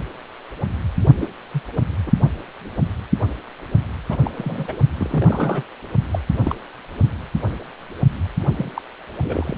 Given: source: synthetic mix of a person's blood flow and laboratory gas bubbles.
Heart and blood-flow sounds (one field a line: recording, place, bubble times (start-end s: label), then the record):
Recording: Doppler ultrasound of blood flow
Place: precordium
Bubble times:
1.21-1.28 s: bubbles
1.53-1.62 s: bubbles
2.06-2.12 s: bubbles
4.09-4.17 s: bubbles
4.24-4.30 s: bubbles
4.35-4.79 s: bubbles
4.98-5.63 s: bubbles
6.11-6.19 s: bubbles
6.44-6.55 s: bubbles
8.57-8.71 s: bubbles
8.75-8.82 s: bubbles
9.23-9.56 s: bubbles
From the record:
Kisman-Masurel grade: 232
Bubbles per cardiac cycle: several, 3 to 8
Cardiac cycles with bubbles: 50 to 99%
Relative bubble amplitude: moderate (0.250 to 0.450)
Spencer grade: 3 (all of the cardiac periods contain showers or single bubble signals, but not dominating or overriding the cardiac motion signals)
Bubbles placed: only in the low amplitude regions of the cardiac cycle